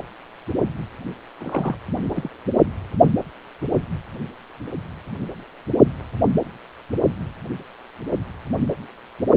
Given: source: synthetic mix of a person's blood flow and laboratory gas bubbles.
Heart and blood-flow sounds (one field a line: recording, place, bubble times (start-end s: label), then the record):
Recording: Doppler ultrasound of blood flow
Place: precordium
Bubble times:
1.41-1.77 s: bubbles
2.09-2.29 s: bubbles
From the record:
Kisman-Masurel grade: 121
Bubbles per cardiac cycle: 1 to 2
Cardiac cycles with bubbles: 10 to 50%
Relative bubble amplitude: barely perceptible (0.100 to 0.250)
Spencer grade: 2 (many but less than half of the cardiac periods contain bubble signals, singularly or in groups)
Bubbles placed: only in the low amplitude regions of the cardiac cycle